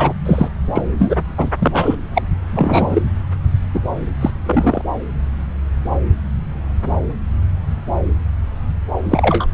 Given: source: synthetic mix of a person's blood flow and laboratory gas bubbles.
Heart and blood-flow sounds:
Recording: Doppler ultrasound of blood flow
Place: subclavian vein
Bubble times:
0.00-0.13 s: bubbles
0.25-0.48 s: bubbles
0.74-0.82 s: bubbles
0.98-1.17 s: bubbles
1.38-1.49 s: bubbles
1.58-1.95 s: bubbles
2.14-2.23 s: bubbles
2.42-3.03 s: bubbles
3.74-3.81 s: bubbles
4.21-4.31 s: bubbles
4.46-4.82 s: bubbles
9.08-9.47 s: bubbles
From the record:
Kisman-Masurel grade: 233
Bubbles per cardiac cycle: several, 3 to 8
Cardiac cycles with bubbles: 50 to 99%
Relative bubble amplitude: loud (0.450 to 0.775)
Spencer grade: 3 (all of the cardiac periods contain showers or single bubble signals, but not dominating or overriding the cardiac motion signals)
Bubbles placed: anywhere in the cardiac cycle

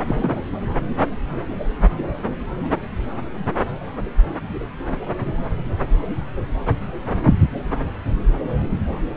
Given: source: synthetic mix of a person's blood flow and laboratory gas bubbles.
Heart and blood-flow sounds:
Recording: Doppler ultrasound of blood flow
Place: subclavian vein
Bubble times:
0.07-0.40 s: bubbles
From the record:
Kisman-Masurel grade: 112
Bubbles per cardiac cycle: 1 to 2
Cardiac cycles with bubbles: 1 to 10%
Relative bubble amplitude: moderate (0.250 to 0.450)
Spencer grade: 1 (occasional bubble signal discernible with the cardiac motion signal, with majority of cardiac periods free of bubbles)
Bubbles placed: anywhere in the cardiac cycle

